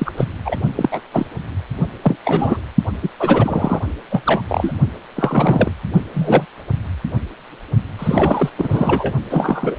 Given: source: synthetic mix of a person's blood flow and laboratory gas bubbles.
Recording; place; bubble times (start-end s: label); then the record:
Doppler ultrasound of blood flow; precordium
0.00-0.11 s: bubbles
0.17-0.25 s: bubbles
0.45-0.57 s: bubbles
0.76-0.89 s: bubbles
0.91-1.01 s: bubbles
1.12-1.26 s: bubbles
2.03-2.16 s: bubbles
2.24-2.61 s: bubbles
3.03-3.10 s: bubbles
3.19-3.79 s: bubbles
4.11-4.22 s: bubbles
4.25-4.42 s: bubbles
4.48-4.74 s: bubbles
5.16-5.71 s: bubbles
6.13-6.46 s: bubbles
7.98-8.50 s: bubbles
8.58-9.13 s: bubbles
9.29-9.76 s: bubbles
From the record:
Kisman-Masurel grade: 243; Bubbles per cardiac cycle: several, 3 to 8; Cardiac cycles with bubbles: 100%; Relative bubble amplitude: loud (0.450 to 0.775); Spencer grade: 3 (all of the cardiac periods contain showers or single bubble signals, but not dominating or overriding the cardiac motion signals); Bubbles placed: only in the low amplitude regions of the cardiac cycle